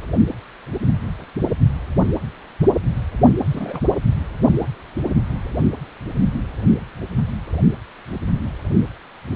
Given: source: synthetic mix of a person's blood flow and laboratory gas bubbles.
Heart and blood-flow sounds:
Doppler ultrasound of blood flow; precordium
3.48-3.80 s: bubbles
3.86-3.95 s: bubbles
From the record:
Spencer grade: 1 (occasional bubble signal discernible with the cardiac motion signal, with majority of cardiac periods free of bubbles); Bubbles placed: anywhere in the cardiac cycle

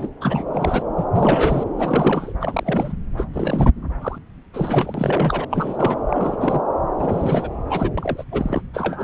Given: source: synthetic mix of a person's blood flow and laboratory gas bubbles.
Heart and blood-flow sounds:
Doppler ultrasound of blood flow; subclavian vein
0.00-0.11 s: bubbles
0.21-0.43 s: bubbles
0.52-0.82 s: bubbles
0.97-1.05 s: bubbles
1.13-1.63 s: bubbles
1.77-2.33 s: bubbles
2.40-2.92 s: bubbles
3.17-3.24 s: bubbles
3.33-3.71 s: bubbles
4.01-4.18 s: bubbles
4.54-5.45 s: bubbles
5.50-5.97 s: bubbles
6.09-6.62 s: bubbles
6.97-7.49 s: bubbles
7.70-7.91 s: bubbles
7.97-8.23 s: bubbles
8.31-8.62 s: bubbles
8.73-9.04 s: bubbles
From the record:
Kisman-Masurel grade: 342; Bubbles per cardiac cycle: rolling drumbeat, 9 or more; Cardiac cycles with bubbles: 100%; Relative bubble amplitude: moderate (0.250 to 0.450); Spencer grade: 3 (all of the cardiac periods contain showers or single bubble signals, but not dominating or overriding the cardiac motion signals); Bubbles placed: anywhere in the cardiac cycle

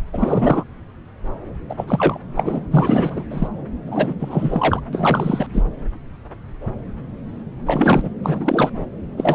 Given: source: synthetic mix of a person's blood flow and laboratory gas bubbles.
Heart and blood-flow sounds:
Doppler ultrasound of blood flow; subclavian vein
0.13-0.64 s: bubbles
1.69-1.75 s: bubbles
1.77-2.19 s: bubbles
2.35-2.60 s: bubbles
2.72-3.23 s: bubbles
3.30-3.48 s: bubbles
3.86-4.14 s: bubbles
4.20-4.80 s: bubbles
4.92-5.46 s: bubbles
5.53-5.64 s: bubbles
7.66-8.09 s: bubbles
8.23-8.70 s: bubbles
9.17-9.35 s: bubbles
From the record:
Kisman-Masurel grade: 333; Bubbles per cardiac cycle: rolling drumbeat, 9 or more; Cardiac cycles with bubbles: 50 to 99%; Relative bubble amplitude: loud (0.450 to 0.775); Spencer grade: 3 (all of the cardiac periods contain showers or single bubble signals, but not dominating or overriding the cardiac motion signals); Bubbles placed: anywhere in the cardiac cycle

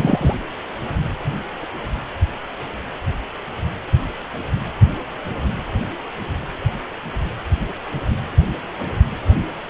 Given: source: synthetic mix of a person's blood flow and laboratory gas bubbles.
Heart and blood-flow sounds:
Doppler ultrasound of blood flow; precordium
0.00-0.36 s: bubbles
From the record:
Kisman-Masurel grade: 212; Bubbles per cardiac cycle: several, 3 to 8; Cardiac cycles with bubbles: 1 to 10%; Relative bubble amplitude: moderate (0.250 to 0.450); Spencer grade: 1 (occasional bubble signal discernible with the cardiac motion signal, with majority of cardiac periods free of bubbles); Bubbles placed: anywhere in the cardiac cycle

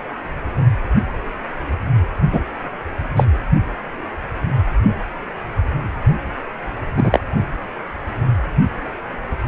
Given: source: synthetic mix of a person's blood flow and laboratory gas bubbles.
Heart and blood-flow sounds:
Doppler ultrasound of blood flow; precordium
2.33-2.41 s: bubbles
3.16-3.26 s: bubbles
6.96-7.19 s: bubbles
From the record:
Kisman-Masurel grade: 123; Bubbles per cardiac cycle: 1 to 2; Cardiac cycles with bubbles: 10 to 50%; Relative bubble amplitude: loud (0.450 to 0.775); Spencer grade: 2 (many but less than half of the cardiac periods contain bubble signals, singularly or in groups); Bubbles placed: only in the low amplitude regions of the cardiac cycle

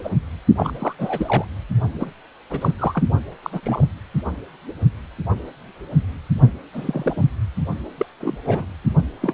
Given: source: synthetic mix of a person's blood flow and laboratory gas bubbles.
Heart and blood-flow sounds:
Doppler ultrasound of blood flow; precordium
0.00-0.10 s: bubbles
0.56-0.72 s: bubbles
0.78-0.93 s: bubbles
0.98-1.45 s: bubbles
1.99-2.12 s: bubbles
2.50-2.74 s: bubbles
2.79-3.04 s: bubbles
3.42-3.50 s: bubbles
3.53-3.60 s: bubbles
3.63-3.85 s: bubbles
6.73-7.25 s: bubbles
7.98-8.06 s: bubbles
8.20-8.38 s: bubbles
8.45-8.66 s: bubbles
9.21-9.34 s: bubbles
From the record:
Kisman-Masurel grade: 232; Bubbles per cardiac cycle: several, 3 to 8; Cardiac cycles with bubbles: 50 to 99%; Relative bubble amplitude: moderate (0.250 to 0.450); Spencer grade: 3 (all of the cardiac periods contain showers or single bubble signals, but not dominating or overriding the cardiac motion signals); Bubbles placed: only in the low amplitude regions of the cardiac cycle

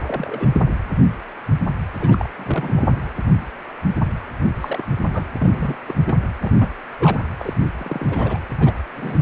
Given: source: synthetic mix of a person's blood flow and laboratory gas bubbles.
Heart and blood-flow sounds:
Doppler ultrasound of blood flow; precordium
0.07-0.47 s: bubbles
0.52-0.65 s: bubbles
1.99-2.29 s: bubbles
2.36-2.86 s: bubbles
4.61-4.83 s: bubbles
5.14-5.24 s: bubbles
5.38-5.75 s: bubbles
5.88-5.94 s: bubbles
6.07-6.17 s: bubbles
6.42-6.52 s: bubbles
6.59-6.70 s: bubbles
6.99-7.22 s: bubbles
7.39-7.54 s: bubbles
7.77-8.38 s: bubbles
8.59-8.73 s: bubbles
8.96-9.18 s: bubbles
From the record:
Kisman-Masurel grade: 232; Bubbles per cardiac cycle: several, 3 to 8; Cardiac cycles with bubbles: 50 to 99%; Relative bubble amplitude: moderate (0.250 to 0.450); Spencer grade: 3 (all of the cardiac periods contain showers or single bubble signals, but not dominating or overriding the cardiac motion signals); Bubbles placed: anywhere in the cardiac cycle

